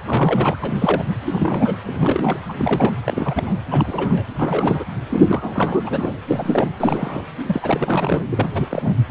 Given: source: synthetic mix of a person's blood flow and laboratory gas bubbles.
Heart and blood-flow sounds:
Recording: Doppler ultrasound of blood flow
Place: precordium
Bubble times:
0.04-0.57 s: bubbles
0.60-1.04 s: bubbles
1.26-1.77 s: bubbles
1.83-2.39 s: bubbles
2.48-2.53 s: bubbles
2.58-2.94 s: bubbles
3.04-3.61 s: bubbles
3.71-4.25 s: bubbles
4.38-4.84 s: bubbles
5.10-6.18 s: bubbles
6.28-6.69 s: bubbles
6.80-7.22 s: bubbles
7.48-8.23 s: bubbles
8.31-8.49 s: bubbles
8.53-8.68 s: bubbles
8.71-8.95 s: bubbles
From the record:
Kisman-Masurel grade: 342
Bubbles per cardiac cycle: rolling drumbeat, 9 or more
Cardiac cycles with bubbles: 100%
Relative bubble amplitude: moderate (0.250 to 0.450)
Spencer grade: 3 (all of the cardiac periods contain showers or single bubble signals, but not dominating or overriding the cardiac motion signals)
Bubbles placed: anywhere in the cardiac cycle

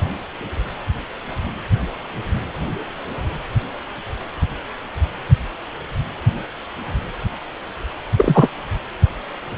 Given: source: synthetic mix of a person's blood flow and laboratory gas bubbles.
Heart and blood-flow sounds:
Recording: Doppler ultrasound of blood flow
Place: precordium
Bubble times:
8.16-8.49 s: bubbles
From the record:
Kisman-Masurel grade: 213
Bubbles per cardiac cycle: several, 3 to 8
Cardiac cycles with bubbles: 1 to 10%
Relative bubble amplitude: loud (0.450 to 0.775)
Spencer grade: 1 (occasional bubble signal discernible with the cardiac motion signal, with majority of cardiac periods free of bubbles)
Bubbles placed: anywhere in the cardiac cycle

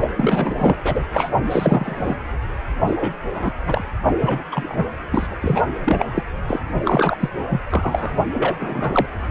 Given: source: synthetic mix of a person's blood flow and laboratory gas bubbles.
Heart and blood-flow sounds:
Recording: Doppler ultrasound of blood flow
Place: precordium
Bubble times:
0.01-0.09 s: bubbles
0.15-0.76 s: bubbles
0.85-1.03 s: bubbles
1.12-1.29 s: bubbles
1.50-2.16 s: bubbles
2.87-3.12 s: bubbles
3.33-3.52 s: bubbles
3.67-3.84 s: bubbles
4.21-4.43 s: bubbles
4.51-4.85 s: bubbles
5.12-5.27 s: bubbles
5.30-5.36 s: bubbles
5.41-5.63 s: bubbles
5.84-6.06 s: bubbles
6.14-6.23 s: bubbles
6.47-6.61 s: bubbles
6.85-7.17 s: bubbles
7.20-7.29 s: bubbles
7.50-7.61 s: bubbles
7.70-8.15 s: bubbles
8.33-9.06 s: bubbles
From the record:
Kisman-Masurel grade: 243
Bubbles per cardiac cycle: several, 3 to 8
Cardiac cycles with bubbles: 100%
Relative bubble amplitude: loud (0.450 to 0.775)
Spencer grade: 3 (all of the cardiac periods contain showers or single bubble signals, but not dominating or overriding the cardiac motion signals)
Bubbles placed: anywhere in the cardiac cycle

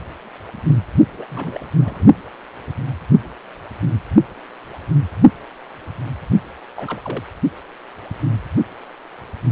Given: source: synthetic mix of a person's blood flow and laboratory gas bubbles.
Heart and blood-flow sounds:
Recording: Doppler ultrasound of blood flow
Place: precordium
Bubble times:
1.17-1.26 s: bubbles
1.30-1.66 s: bubbles
1.75-2.04 s: bubbles
6.75-7.01 s: bubbles
7.04-7.23 s: bubbles
From the record:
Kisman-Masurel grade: 221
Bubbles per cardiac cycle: several, 3 to 8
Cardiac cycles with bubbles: 10 to 50%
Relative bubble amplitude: barely perceptible (0.100 to 0.250)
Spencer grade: 2 (many but less than half of the cardiac periods contain bubble signals, singularly or in groups)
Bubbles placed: only in the low amplitude regions of the cardiac cycle

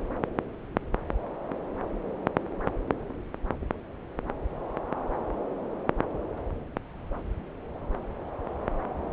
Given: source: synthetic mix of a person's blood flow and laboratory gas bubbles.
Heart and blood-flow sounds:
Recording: Doppler ultrasound of blood flow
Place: subclavian vein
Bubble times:
no bubbles
From the record:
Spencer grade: 0 (complete lack of bubble signals)

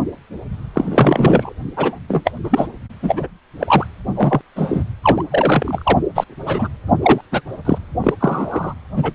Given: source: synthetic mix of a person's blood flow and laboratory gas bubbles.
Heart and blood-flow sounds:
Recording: Doppler ultrasound of blood flow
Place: precordium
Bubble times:
0.73-1.52 s: bubbles
1.77-1.99 s: bubbles
2.08-2.31 s: bubbles
2.44-2.68 s: bubbles
3.02-3.27 s: bubbles
3.59-3.87 s: bubbles
4.15-4.41 s: bubbles
4.56-4.83 s: bubbles
5.03-5.23 s: bubbles
5.30-5.98 s: bubbles
6.15-6.24 s: bubbles
6.46-6.68 s: bubbles
7.02-7.21 s: bubbles
7.32-7.42 s: bubbles
7.65-7.78 s: bubbles
8.01-8.14 s: bubbles
8.20-8.73 s: bubbles
8.96-9.12 s: bubbles
From the record:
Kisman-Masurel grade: 233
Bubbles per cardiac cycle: several, 3 to 8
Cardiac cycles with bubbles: 50 to 99%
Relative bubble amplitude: loud (0.450 to 0.775)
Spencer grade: 3 (all of the cardiac periods contain showers or single bubble signals, but not dominating or overriding the cardiac motion signals)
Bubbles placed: anywhere in the cardiac cycle

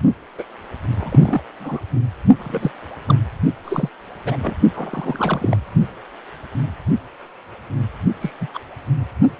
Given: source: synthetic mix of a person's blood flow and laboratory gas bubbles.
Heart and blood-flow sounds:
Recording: Doppler ultrasound of blood flow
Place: precordium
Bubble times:
0.38-0.44 s: bubbles
0.95-1.44 s: bubbles
1.60-1.85 s: bubbles
2.39-2.71 s: bubbles
3.08-3.18 s: bubbles
3.64-3.90 s: bubbles
4.24-4.36 s: bubbles
4.42-4.55 s: bubbles
4.74-5.57 s: bubbles
8.21-8.31 s: bubbles
8.40-8.47 s: bubbles
8.54-8.59 s: bubbles
From the record:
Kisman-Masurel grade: 222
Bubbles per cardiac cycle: several, 3 to 8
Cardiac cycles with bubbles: 10 to 50%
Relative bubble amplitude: moderate (0.250 to 0.450)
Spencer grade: 2 (many but less than half of the cardiac periods contain bubble signals, singularly or in groups)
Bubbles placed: only in the low amplitude regions of the cardiac cycle

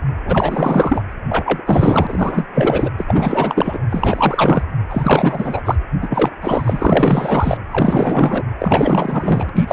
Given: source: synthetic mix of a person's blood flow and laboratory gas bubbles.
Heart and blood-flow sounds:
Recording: Doppler ultrasound of blood flow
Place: precordium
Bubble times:
0.25-1.02 s: bubbles
1.29-1.62 s: bubbles
1.66-2.46 s: bubbles
2.54-2.89 s: bubbles
2.98-3.05 s: bubbles
3.07-3.79 s: bubbles
3.91-4.63 s: bubbles
4.89-5.62 s: bubbles
5.65-5.75 s: bubbles
6.00-6.30 s: bubbles
6.42-7.58 s: bubbles
7.69-8.43 s: bubbles
8.59-9.50 s: bubbles
9.54-9.65 s: bubbles
9.68-9.72 s: bubbles
From the record:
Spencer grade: 4 (maximum detectable bubble signal sounding continuously throughout systole and diastole of every cardiac period, and overriding the amplitude of the normal cardiac signals)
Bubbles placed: anywhere in the cardiac cycle

